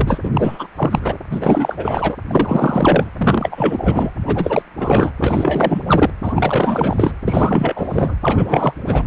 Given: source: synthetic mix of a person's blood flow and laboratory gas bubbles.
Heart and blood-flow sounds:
Doppler ultrasound of blood flow; precordium
0.00-0.21 s: bubbles
0.24-0.30 s: bubbles
0.33-0.67 s: bubbles
0.76-1.18 s: bubbles
1.31-2.17 s: bubbles
2.27-3.09 s: bubbles
3.17-4.11 s: bubbles
4.27-4.62 s: bubbles
4.77-5.12 s: bubbles
5.20-6.10 s: bubbles
6.23-7.12 s: bubbles
7.28-8.16 s: bubbles
8.22-8.73 s: bubbles
8.86-9.07 s: bubbles
From the record:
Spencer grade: 4 (maximum detectable bubble signal sounding continuously throughout systole and diastole of every cardiac period, and overriding the amplitude of the normal cardiac signals); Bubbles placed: anywhere in the cardiac cycle

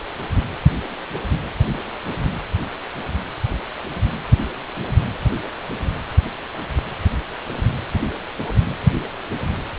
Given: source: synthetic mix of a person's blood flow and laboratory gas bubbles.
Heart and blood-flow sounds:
Doppler ultrasound of blood flow; precordium
no bubbles
From the record:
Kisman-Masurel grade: 000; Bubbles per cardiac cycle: 0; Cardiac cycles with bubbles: 0%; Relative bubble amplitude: no bubbles discernible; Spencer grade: 0 (complete lack of bubble signals)

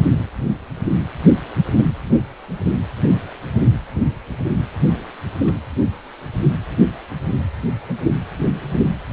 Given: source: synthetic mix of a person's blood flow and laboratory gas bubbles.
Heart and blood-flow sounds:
Doppler ultrasound of blood flow; precordium
1.77-1.85 s: bubbles
3.10-3.19 s: bubbles
3.56-3.62 s: bubbles
5.39-5.58 s: bubbles
From the record:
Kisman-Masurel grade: 121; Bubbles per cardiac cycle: 1 to 2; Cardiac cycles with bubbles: 10 to 50%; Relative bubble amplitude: barely perceptible (0.100 to 0.250); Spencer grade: 2 (many but less than half of the cardiac periods contain bubble signals, singularly or in groups); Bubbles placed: anywhere in the cardiac cycle

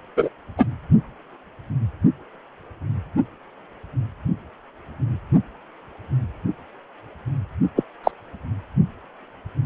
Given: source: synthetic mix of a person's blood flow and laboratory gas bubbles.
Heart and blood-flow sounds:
Doppler ultrasound of blood flow; precordium
0.17-0.29 s: bubbles
0.58-0.65 s: bubbles
7.76-7.83 s: bubbles
8.04-8.12 s: bubbles
From the record:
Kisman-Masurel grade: 123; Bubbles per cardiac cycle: 1 to 2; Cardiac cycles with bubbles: 10 to 50%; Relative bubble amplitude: loud (0.450 to 0.775); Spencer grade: 2 (many but less than half of the cardiac periods contain bubble signals, singularly or in groups); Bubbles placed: only in the low amplitude regions of the cardiac cycle

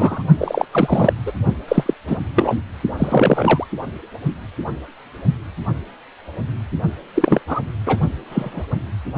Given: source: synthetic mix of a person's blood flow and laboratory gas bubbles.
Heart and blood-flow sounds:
Doppler ultrasound of blood flow; precordium
0.00-0.23 s: bubbles
0.38-0.65 s: bubbles
0.72-1.13 s: bubbles
1.25-1.33 s: bubbles
1.68-1.94 s: bubbles
2.07-2.18 s: bubbles
2.35-2.60 s: bubbles
2.98-3.67 s: bubbles
7.14-7.41 s: bubbles
7.47-7.61 s: bubbles
7.86-7.97 s: bubbles
8.00-8.08 s: bubbles
8.29-8.63 s: bubbles
From the record:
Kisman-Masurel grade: 233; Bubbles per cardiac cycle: several, 3 to 8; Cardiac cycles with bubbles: 50 to 99%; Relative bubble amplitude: loud (0.450 to 0.775); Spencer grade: 3 (all of the cardiac periods contain showers or single bubble signals, but not dominating or overriding the cardiac motion signals); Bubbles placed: only in the low amplitude regions of the cardiac cycle

